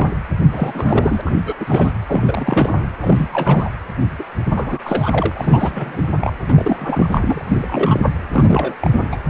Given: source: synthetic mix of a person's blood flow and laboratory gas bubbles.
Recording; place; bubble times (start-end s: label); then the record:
Doppler ultrasound of blood flow; precordium
0.00-0.14 s: bubbles
0.52-1.21 s: bubbles
1.24-1.42 s: bubbles
1.45-1.56 s: bubbles
1.60-1.92 s: bubbles
2.08-2.88 s: bubbles
3.00-3.28 s: bubbles
3.32-3.69 s: bubbles
4.18-4.24 s: bubbles
4.36-4.79 s: bubbles
4.84-5.32 s: bubbles
5.35-6.03 s: bubbles
6.20-6.33 s: bubbles
6.48-8.21 s: bubbles
8.33-8.75 s: bubbles
8.80-9.16 s: bubbles
From the record:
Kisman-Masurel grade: 342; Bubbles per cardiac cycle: rolling drumbeat, 9 or more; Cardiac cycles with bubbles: 100%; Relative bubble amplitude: moderate (0.250 to 0.450); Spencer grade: 3 (all of the cardiac periods contain showers or single bubble signals, but not dominating or overriding the cardiac motion signals); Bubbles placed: anywhere in the cardiac cycle